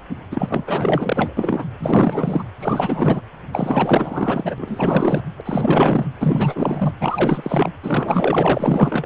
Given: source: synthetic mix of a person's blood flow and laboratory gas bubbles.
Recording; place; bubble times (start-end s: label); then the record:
Doppler ultrasound of blood flow; precordium
0.31-1.34 s: bubbles
1.37-1.66 s: bubbles
1.78-2.43 s: bubbles
2.60-3.21 s: bubbles
3.52-4.55 s: bubbles
4.58-5.23 s: bubbles
5.38-5.41 s: bubbles
5.45-6.06 s: bubbles
6.19-6.93 s: bubbles
7.00-7.70 s: bubbles
7.83-9.06 s: bubbles
From the record:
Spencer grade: 4 (maximum detectable bubble signal sounding continuously throughout systole and diastole of every cardiac period, and overriding the amplitude of the normal cardiac signals); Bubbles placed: anywhere in the cardiac cycle